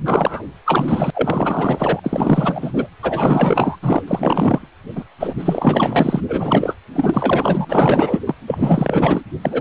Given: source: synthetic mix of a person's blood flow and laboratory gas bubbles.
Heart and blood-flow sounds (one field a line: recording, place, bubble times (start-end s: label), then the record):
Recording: Doppler ultrasound of blood flow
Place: precordium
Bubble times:
0.05-0.43 s: bubbles
0.65-1.10 s: bubbles
1.14-2.00 s: bubbles
2.03-2.88 s: bubbles
3.02-3.77 s: bubbles
3.82-4.01 s: bubbles
4.08-4.68 s: bubbles
4.96-5.04 s: bubbles
5.20-5.35 s: bubbles
5.38-6.21 s: bubbles
6.28-6.74 s: bubbles
6.93-7.66 s: bubbles
7.70-8.20 s: bubbles
8.27-8.35 s: bubbles
8.47-9.21 s: bubbles
9.43-9.61 s: bubbles
From the record:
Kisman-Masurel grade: 444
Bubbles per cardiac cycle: continuous sound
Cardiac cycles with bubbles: 100%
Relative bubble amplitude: maximal (0.775 to 0.999)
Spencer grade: 4 (maximum detectable bubble signal sounding continuously throughout systole and diastole of every cardiac period, and overriding the amplitude of the normal cardiac signals)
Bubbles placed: anywhere in the cardiac cycle